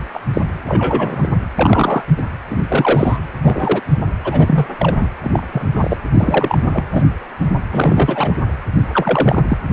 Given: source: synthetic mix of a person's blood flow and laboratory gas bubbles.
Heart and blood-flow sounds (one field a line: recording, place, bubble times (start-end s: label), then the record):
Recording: Doppler ultrasound of blood flow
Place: precordium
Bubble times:
0.12-0.20 s: bubbles
0.34-0.41 s: bubbles
0.67-1.28 s: bubbles
1.58-2.03 s: bubbles
2.17-2.22 s: bubbles
2.50-2.56 s: bubbles
2.60-3.18 s: bubbles
3.43-3.80 s: bubbles
4.23-4.66 s: bubbles
4.79-4.96 s: bubbles
5.00-5.09 s: bubbles
5.21-5.43 s: bubbles
5.52-5.97 s: bubbles
6.14-6.57 s: bubbles
6.72-6.83 s: bubbles
6.92-7.02 s: bubbles
7.71-8.34 s: bubbles
8.92-9.43 s: bubbles
9.48-9.58 s: bubbles
From the record:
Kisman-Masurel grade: 243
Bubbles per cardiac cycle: several, 3 to 8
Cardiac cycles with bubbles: 100%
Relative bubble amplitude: loud (0.450 to 0.775)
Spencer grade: 3 (all of the cardiac periods contain showers or single bubble signals, but not dominating or overriding the cardiac motion signals)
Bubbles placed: anywhere in the cardiac cycle